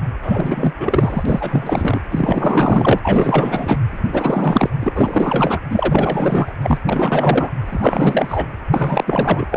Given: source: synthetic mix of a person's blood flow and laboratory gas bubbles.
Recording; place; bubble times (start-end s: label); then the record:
Doppler ultrasound of blood flow; precordium
0.22-0.72 s: bubbles
0.79-2.02 s: bubbles
2.10-2.99 s: bubbles
3.02-3.78 s: bubbles
3.91-4.70 s: bubbles
4.80-5.61 s: bubbles
5.70-6.53 s: bubbles
6.62-6.79 s: bubbles
6.85-7.50 s: bubbles
7.64-8.49 s: bubbles
8.74-9.04 s: bubbles
9.07-9.47 s: bubbles
9.50-9.56 s: bubbles
From the record:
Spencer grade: 4 (maximum detectable bubble signal sounding continuously throughout systole and diastole of every cardiac period, and overriding the amplitude of the normal cardiac signals); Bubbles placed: anywhere in the cardiac cycle